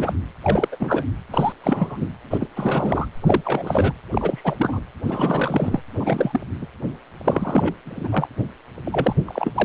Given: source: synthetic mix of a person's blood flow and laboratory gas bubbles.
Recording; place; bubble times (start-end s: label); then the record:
Doppler ultrasound of blood flow; precordium
0.00-0.13 s: bubbles
0.40-0.68 s: bubbles
0.72-0.76 s: bubbles
0.79-1.05 s: bubbles
1.31-1.53 s: bubbles
1.63-2.07 s: bubbles
2.30-2.38 s: bubbles
2.41-2.46 s: bubbles
2.56-3.08 s: bubbles
3.21-3.41 s: bubbles
3.45-3.93 s: bubbles
4.11-4.42 s: bubbles
4.44-4.80 s: bubbles
5.05-5.79 s: bubbles
5.99-6.41 s: bubbles
6.61-6.66 s: bubbles
7.23-7.74 s: bubbles
7.85-8.08 s: bubbles
8.12-8.28 s: bubbles
8.86-9.16 s: bubbles
9.27-9.65 s: bubbles
From the record:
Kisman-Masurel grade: 342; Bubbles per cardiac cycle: rolling drumbeat, 9 or more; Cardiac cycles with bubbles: 100%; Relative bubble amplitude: moderate (0.250 to 0.450); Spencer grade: 3 (all of the cardiac periods contain showers or single bubble signals, but not dominating or overriding the cardiac motion signals); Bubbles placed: anywhere in the cardiac cycle